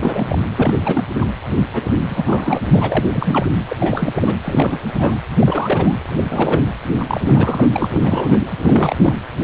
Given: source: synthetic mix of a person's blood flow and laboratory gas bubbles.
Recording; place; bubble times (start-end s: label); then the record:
Doppler ultrasound of blood flow; precordium
0.00-0.39 s: bubbles
0.56-1.04 s: bubbles
1.17-1.27 s: bubbles
1.73-1.83 s: bubbles
2.10-2.69 s: bubbles
2.72-3.05 s: bubbles
3.12-3.46 s: bubbles
3.69-3.77 s: bubbles
3.80-4.12 s: bubbles
4.16-4.35 s: bubbles
4.44-4.79 s: bubbles
4.88-5.18 s: bubbles
5.39-5.96 s: bubbles
6.16-6.24 s: bubbles
6.30-6.64 s: bubbles
6.97-7.21 s: bubbles
7.26-7.70 s: bubbles
7.72-7.87 s: bubbles
7.91-8.40 s: bubbles
8.61-9.14 s: bubbles
From the record:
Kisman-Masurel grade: 342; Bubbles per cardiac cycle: rolling drumbeat, 9 or more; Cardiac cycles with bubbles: 100%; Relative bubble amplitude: moderate (0.250 to 0.450); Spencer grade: 3 (all of the cardiac periods contain showers or single bubble signals, but not dominating or overriding the cardiac motion signals); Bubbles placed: anywhere in the cardiac cycle